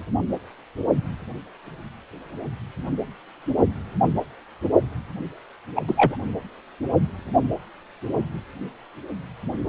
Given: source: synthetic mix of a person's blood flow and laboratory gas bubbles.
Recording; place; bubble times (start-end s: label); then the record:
Doppler ultrasound of blood flow; precordium
5.75-5.83 s: bubbles
5.88-6.16 s: bubbles
From the record:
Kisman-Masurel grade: 223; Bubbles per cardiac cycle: several, 3 to 8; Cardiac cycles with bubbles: 10 to 50%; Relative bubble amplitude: loud (0.450 to 0.775); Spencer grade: 2 (many but less than half of the cardiac periods contain bubble signals, singularly or in groups); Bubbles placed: anywhere in the cardiac cycle